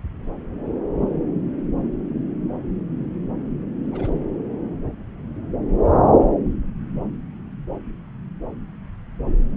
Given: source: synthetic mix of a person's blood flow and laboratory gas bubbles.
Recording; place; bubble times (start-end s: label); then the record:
Doppler ultrasound of blood flow; subclavian vein
3.92-4.13 s: bubbles
From the record:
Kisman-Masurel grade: 111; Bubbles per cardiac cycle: 1 to 2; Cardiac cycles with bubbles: 1 to 10%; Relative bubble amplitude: barely perceptible (0.100 to 0.250); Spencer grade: 1 (occasional bubble signal discernible with the cardiac motion signal, with majority of cardiac periods free of bubbles); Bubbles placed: anywhere in the cardiac cycle